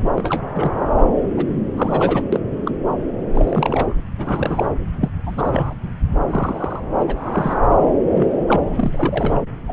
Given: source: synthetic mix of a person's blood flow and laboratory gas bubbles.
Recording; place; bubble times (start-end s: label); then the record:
Doppler ultrasound of blood flow; subclavian vein
0.15-0.44 s: bubbles
0.55-0.81 s: bubbles
1.37-1.44 s: bubbles
1.76-2.23 s: bubbles
2.32-2.40 s: bubbles
2.65-2.71 s: bubbles
3.33-3.95 s: bubbles
4.18-4.68 s: bubbles
5.01-5.10 s: bubbles
5.26-5.74 s: bubbles
6.30-6.80 s: bubbles
6.98-7.04 s: bubbles
7.07-7.61 s: bubbles
8.02-8.10 s: bubbles
8.14-8.29 s: bubbles
8.47-8.60 s: bubbles
8.76-9.43 s: bubbles
9.67-9.73 s: bubbles
From the record:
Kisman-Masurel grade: 232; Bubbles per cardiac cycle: several, 3 to 8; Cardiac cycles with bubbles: 50 to 99%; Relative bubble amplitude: moderate (0.250 to 0.450); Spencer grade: 3 (all of the cardiac periods contain showers or single bubble signals, but not dominating or overriding the cardiac motion signals); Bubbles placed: anywhere in the cardiac cycle